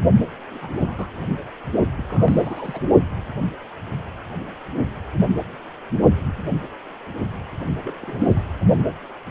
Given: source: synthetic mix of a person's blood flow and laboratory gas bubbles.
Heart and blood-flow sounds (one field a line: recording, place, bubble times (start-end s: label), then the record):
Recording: Doppler ultrasound of blood flow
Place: precordium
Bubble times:
0.50-0.58 s: bubbles
0.61-1.07 s: bubbles
1.16-1.25 s: bubbles
1.96-2.04 s: bubbles
2.08-2.80 s: bubbles
7.80-7.93 s: bubbles
8.01-8.44 s: bubbles
From the record:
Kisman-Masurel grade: 221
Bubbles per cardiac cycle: several, 3 to 8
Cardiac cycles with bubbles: 10 to 50%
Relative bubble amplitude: barely perceptible (0.100 to 0.250)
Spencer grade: 2 (many but less than half of the cardiac periods contain bubble signals, singularly or in groups)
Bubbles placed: only in the low amplitude regions of the cardiac cycle